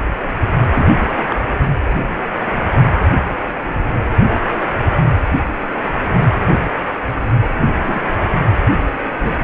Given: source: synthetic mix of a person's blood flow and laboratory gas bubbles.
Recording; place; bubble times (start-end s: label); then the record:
Doppler ultrasound of blood flow; precordium
0.74-0.85 s: bubbles
1.29-1.36 s: bubbles
7.83-8.02 s: bubbles
9.19-9.39 s: bubbles
From the record:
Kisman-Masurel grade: 122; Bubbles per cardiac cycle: 1 to 2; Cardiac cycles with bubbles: 10 to 50%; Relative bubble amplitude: moderate (0.250 to 0.450); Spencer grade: 2 (many but less than half of the cardiac periods contain bubble signals, singularly or in groups); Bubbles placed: anywhere in the cardiac cycle